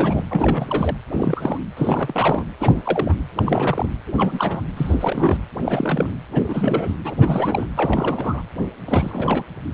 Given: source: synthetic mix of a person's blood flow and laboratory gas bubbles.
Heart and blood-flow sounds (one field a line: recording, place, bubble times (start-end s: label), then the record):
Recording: Doppler ultrasound of blood flow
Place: precordium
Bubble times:
0.00-0.26 s: bubbles
0.30-0.96 s: bubbles
1.16-1.58 s: bubbles
1.76-2.44 s: bubbles
2.58-2.80 s: bubbles
2.83-3.15 s: bubbles
3.35-3.88 s: bubbles
4.08-4.12 s: bubbles
4.16-4.62 s: bubbles
4.76-5.37 s: bubbles
5.62-6.14 s: bubbles
6.32-6.95 s: bubbles
7.04-7.15 s: bubbles
7.20-7.66 s: bubbles
7.78-8.43 s: bubbles
8.81-9.44 s: bubbles
From the record:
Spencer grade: 3 (all of the cardiac periods contain showers or single bubble signals, but not dominating or overriding the cardiac motion signals)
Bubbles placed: anywhere in the cardiac cycle